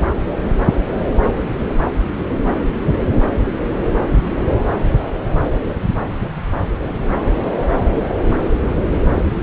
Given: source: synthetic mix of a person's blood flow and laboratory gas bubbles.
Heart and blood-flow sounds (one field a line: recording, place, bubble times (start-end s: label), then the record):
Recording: Doppler ultrasound of blood flow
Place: subclavian vein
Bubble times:
no bubbles
From the record:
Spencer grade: 0 (complete lack of bubble signals)